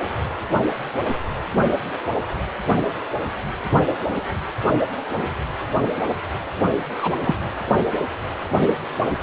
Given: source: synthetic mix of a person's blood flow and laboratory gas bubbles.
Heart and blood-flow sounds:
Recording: Doppler ultrasound of blood flow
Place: precordium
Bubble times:
6.97-7.14 s: bubbles
7.24-7.36 s: bubbles
From the record:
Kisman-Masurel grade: 112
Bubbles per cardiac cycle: 1 to 2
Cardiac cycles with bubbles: 1 to 10%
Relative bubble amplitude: moderate (0.250 to 0.450)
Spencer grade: 1 (occasional bubble signal discernible with the cardiac motion signal, with majority of cardiac periods free of bubbles)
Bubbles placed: anywhere in the cardiac cycle

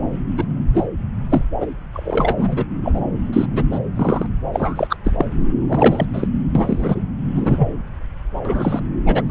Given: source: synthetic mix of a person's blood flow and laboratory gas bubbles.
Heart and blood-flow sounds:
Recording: Doppler ultrasound of blood flow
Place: subclavian vein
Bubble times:
0.37-0.45 s: bubbles
0.73-0.85 s: bubbles
1.30-1.44 s: bubbles
1.60-1.68 s: bubbles
1.93-2.65 s: bubbles
2.83-3.02 s: bubbles
3.33-3.46 s: bubbles
3.53-3.64 s: bubbles
3.71-3.79 s: bubbles
3.96-4.27 s: bubbles
4.54-4.96 s: bubbles
5.04-5.12 s: bubbles
5.18-5.25 s: bubbles
5.67-6.06 s: bubbles
6.13-6.28 s: bubbles
6.55-6.96 s: bubbles
7.33-7.72 s: bubbles
8.45-8.80 s: bubbles
9.05-9.22 s: bubbles
9.27-9.31 s: bubbles
From the record:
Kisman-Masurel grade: 243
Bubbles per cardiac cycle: several, 3 to 8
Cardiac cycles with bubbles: 100%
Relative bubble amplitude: loud (0.450 to 0.775)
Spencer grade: 3 (all of the cardiac periods contain showers or single bubble signals, but not dominating or overriding the cardiac motion signals)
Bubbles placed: anywhere in the cardiac cycle

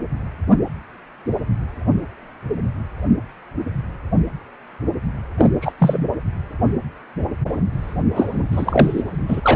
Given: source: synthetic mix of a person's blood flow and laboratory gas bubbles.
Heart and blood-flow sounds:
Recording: Doppler ultrasound of blood flow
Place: precordium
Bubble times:
5.38-5.51 s: bubbles
5.61-5.72 s: bubbles
5.79-6.07 s: bubbles
8.16-8.24 s: bubbles
8.51-9.04 s: bubbles
9.29-9.56 s: bubbles
From the record:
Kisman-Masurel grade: 223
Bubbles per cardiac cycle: several, 3 to 8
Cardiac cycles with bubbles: 10 to 50%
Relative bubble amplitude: loud (0.450 to 0.775)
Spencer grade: 2 (many but less than half of the cardiac periods contain bubble signals, singularly or in groups)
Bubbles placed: anywhere in the cardiac cycle

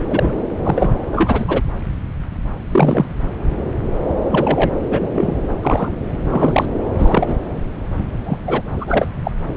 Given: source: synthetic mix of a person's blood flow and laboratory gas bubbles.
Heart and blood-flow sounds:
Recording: Doppler ultrasound of blood flow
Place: subclavian vein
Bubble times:
0.10-0.34 s: bubbles
0.63-0.95 s: bubbles
1.12-1.62 s: bubbles
2.71-3.05 s: bubbles
4.30-4.76 s: bubbles
4.90-5.11 s: bubbles
5.15-5.36 s: bubbles
5.62-5.91 s: bubbles
6.30-6.66 s: bubbles
6.98-7.37 s: bubbles
8.25-8.38 s: bubbles
8.46-8.62 s: bubbles
8.77-9.08 s: bubbles
9.24-9.31 s: bubbles
From the record:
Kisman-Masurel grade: 233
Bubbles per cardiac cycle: several, 3 to 8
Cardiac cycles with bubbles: 50 to 99%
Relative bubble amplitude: loud (0.450 to 0.775)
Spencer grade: 3 (all of the cardiac periods contain showers or single bubble signals, but not dominating or overriding the cardiac motion signals)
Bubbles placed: anywhere in the cardiac cycle

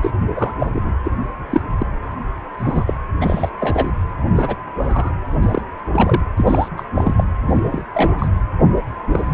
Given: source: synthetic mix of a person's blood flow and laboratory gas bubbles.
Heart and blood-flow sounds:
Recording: Doppler ultrasound of blood flow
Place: precordium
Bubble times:
0.02-0.12 s: bubbles
0.36-0.54 s: bubbles
0.59-0.67 s: bubbles
0.73-0.95 s: bubbles
1.03-1.11 s: bubbles
1.50-1.61 s: bubbles
1.78-1.86 s: bubbles
2.58-2.94 s: bubbles
3.21-3.50 s: bubbles
3.59-3.96 s: bubbles
4.30-4.55 s: bubbles
4.78-5.13 s: bubbles
5.34-5.62 s: bubbles
5.92-6.22 s: bubbles
6.38-6.68 s: bubbles
6.76-6.85 s: bubbles
6.95-7.24 s: bubbles
7.46-7.82 s: bubbles
7.94-8.28 s: bubbles
8.77-8.81 s: bubbles
9.12-9.34 s: bubbles
From the record:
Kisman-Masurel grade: 242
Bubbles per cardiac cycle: several, 3 to 8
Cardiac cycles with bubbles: 100%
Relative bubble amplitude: moderate (0.250 to 0.450)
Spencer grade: 3 (all of the cardiac periods contain showers or single bubble signals, but not dominating or overriding the cardiac motion signals)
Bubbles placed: anywhere in the cardiac cycle

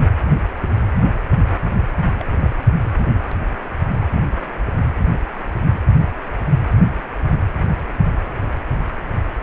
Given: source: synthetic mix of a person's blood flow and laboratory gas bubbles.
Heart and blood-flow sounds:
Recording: Doppler ultrasound of blood flow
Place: precordium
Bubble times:
2.18-2.24 s: bubbles
2.32-2.56 s: bubbles
From the record:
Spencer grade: 2 (many but less than half of the cardiac periods contain bubble signals, singularly or in groups)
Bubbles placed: anywhere in the cardiac cycle

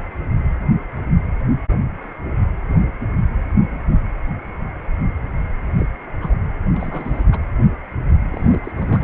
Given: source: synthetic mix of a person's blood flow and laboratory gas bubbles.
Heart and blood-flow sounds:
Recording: Doppler ultrasound of blood flow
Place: precordium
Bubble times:
5.76-5.86 s: bubbles
6.21-6.37 s: bubbles
6.72-7.23 s: bubbles
7.32-7.38 s: bubbles
8.30-8.71 s: bubbles
8.74-9.04 s: bubbles
From the record:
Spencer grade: 2 (many but less than half of the cardiac periods contain bubble signals, singularly or in groups)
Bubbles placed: anywhere in the cardiac cycle

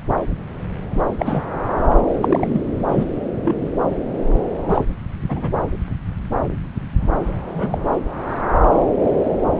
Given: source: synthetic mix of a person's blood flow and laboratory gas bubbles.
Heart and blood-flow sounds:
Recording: Doppler ultrasound of blood flow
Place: subclavian vein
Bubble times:
1.19-1.43 s: bubbles
2.21-2.61 s: bubbles
2.88-3.05 s: bubbles
3.44-3.69 s: bubbles
4.68-4.84 s: bubbles
5.29-5.59 s: bubbles
7.49-7.78 s: bubbles
From the record:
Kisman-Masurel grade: 222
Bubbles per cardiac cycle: several, 3 to 8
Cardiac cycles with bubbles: 10 to 50%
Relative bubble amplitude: moderate (0.250 to 0.450)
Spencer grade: 2 (many but less than half of the cardiac periods contain bubble signals, singularly or in groups)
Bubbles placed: anywhere in the cardiac cycle

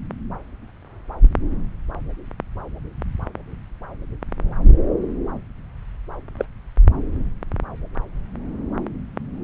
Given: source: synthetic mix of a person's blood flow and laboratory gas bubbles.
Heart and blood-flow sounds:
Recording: Doppler ultrasound of blood flow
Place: subclavian vein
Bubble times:
6.39-6.45 s: bubbles
From the record:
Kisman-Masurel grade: 112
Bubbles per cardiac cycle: 1 to 2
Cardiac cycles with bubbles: 1 to 10%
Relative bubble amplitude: moderate (0.250 to 0.450)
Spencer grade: 1 (occasional bubble signal discernible with the cardiac motion signal, with majority of cardiac periods free of bubbles)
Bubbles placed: anywhere in the cardiac cycle

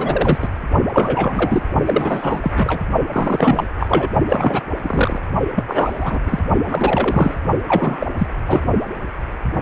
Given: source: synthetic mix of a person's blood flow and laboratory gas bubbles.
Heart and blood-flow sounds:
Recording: Doppler ultrasound of blood flow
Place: precordium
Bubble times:
0.00-0.38 s: bubbles
0.41-0.48 s: bubbles
0.92-1.62 s: bubbles
1.85-2.52 s: bubbles
2.55-2.83 s: bubbles
3.12-3.67 s: bubbles
3.80-4.09 s: bubbles
4.29-4.62 s: bubbles
4.83-5.22 s: bubbles
5.55-5.64 s: bubbles
5.67-6.19 s: bubbles
6.27-6.39 s: bubbles
6.66-7.39 s: bubbles
7.68-8.07 s: bubbles
8.18-8.27 s: bubbles
8.46-8.62 s: bubbles
From the record:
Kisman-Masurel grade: 333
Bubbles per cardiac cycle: rolling drumbeat, 9 or more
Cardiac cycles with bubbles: 50 to 99%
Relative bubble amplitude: loud (0.450 to 0.775)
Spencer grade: 3 (all of the cardiac periods contain showers or single bubble signals, but not dominating or overriding the cardiac motion signals)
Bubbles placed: only in the low amplitude regions of the cardiac cycle

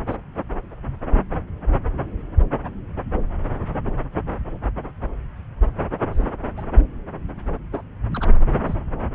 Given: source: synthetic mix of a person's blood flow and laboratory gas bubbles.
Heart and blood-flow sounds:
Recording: Doppler ultrasound of blood flow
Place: subclavian vein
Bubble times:
0.08-0.16 s: bubbles
6.12-6.25 s: bubbles
6.57-6.64 s: bubbles
7.72-7.82 s: bubbles
8.12-8.29 s: bubbles
8.64-8.75 s: bubbles
From the record:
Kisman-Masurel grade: 121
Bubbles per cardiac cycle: 1 to 2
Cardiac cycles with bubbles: 10 to 50%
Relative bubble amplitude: barely perceptible (0.100 to 0.250)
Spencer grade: 2 (many but less than half of the cardiac periods contain bubble signals, singularly or in groups)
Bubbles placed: anywhere in the cardiac cycle

